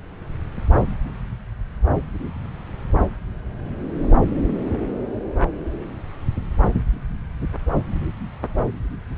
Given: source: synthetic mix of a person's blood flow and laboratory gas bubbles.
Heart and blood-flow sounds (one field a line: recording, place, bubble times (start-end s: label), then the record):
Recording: Doppler ultrasound of blood flow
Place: subclavian vein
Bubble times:
4.69-4.78 s: bubbles
From the record:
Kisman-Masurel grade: 111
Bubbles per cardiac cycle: 1 to 2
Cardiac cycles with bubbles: 1 to 10%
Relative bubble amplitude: barely perceptible (0.100 to 0.250)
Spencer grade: 1 (occasional bubble signal discernible with the cardiac motion signal, with majority of cardiac periods free of bubbles)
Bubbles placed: anywhere in the cardiac cycle